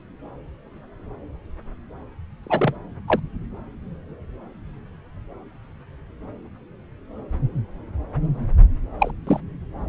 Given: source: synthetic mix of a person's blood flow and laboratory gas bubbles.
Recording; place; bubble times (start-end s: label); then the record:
Doppler ultrasound of blood flow; subclavian vein
2.43-2.76 s: bubbles
3.07-3.20 s: bubbles
8.99-9.11 s: bubbles
9.27-9.40 s: bubbles
From the record:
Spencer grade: 2 (many but less than half of the cardiac periods contain bubble signals, singularly or in groups); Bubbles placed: anywhere in the cardiac cycle